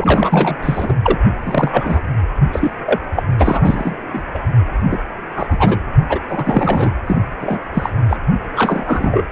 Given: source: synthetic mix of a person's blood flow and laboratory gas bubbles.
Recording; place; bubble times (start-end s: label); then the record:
Doppler ultrasound of blood flow; precordium
0.00-0.56 s: bubbles
0.62-0.93 s: bubbles
1.03-1.19 s: bubbles
1.46-2.02 s: bubbles
2.52-2.71 s: bubbles
2.85-2.99 s: bubbles
3.16-3.23 s: bubbles
3.39-3.98 s: bubbles
4.12-4.21 s: bubbles
4.34-4.39 s: bubbles
4.90-4.99 s: bubbles
5.36-5.78 s: bubbles
6.09-6.19 s: bubbles
6.29-6.92 s: bubbles
7.06-7.17 s: bubbles
7.42-7.59 s: bubbles
7.73-7.90 s: bubbles
8.09-8.18 s: bubbles
8.56-9.23 s: bubbles
From the record:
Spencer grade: 3 (all of the cardiac periods contain showers or single bubble signals, but not dominating or overriding the cardiac motion signals); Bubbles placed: anywhere in the cardiac cycle